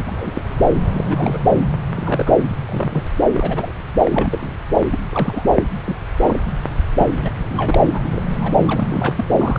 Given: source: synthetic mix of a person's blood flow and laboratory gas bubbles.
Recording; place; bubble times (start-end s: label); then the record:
Doppler ultrasound of blood flow; subclavian vein
0.06-0.43 s: bubbles
0.89-1.03 s: bubbles
1.08-1.38 s: bubbles
1.94-2.33 s: bubbles
2.66-3.06 s: bubbles
3.32-3.73 s: bubbles
4.04-4.55 s: bubbles
4.92-5.61 s: bubbles
5.86-5.98 s: bubbles
6.19-6.40 s: bubbles
6.96-7.10 s: bubbles
7.16-7.31 s: bubbles
7.47-7.79 s: bubbles
7.93-8.21 s: bubbles
8.42-8.52 s: bubbles
8.68-9.24 s: bubbles
9.38-9.59 s: bubbles
From the record:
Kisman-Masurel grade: 242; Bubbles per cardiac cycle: several, 3 to 8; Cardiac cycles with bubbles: 100%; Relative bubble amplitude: moderate (0.250 to 0.450); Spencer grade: 3 (all of the cardiac periods contain showers or single bubble signals, but not dominating or overriding the cardiac motion signals); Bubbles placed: anywhere in the cardiac cycle